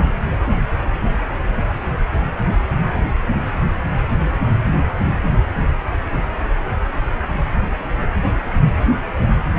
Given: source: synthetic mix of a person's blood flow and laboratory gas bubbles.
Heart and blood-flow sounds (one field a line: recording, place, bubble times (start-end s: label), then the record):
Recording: Doppler ultrasound of blood flow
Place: precordium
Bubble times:
no bubbles
From the record:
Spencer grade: 0 (complete lack of bubble signals)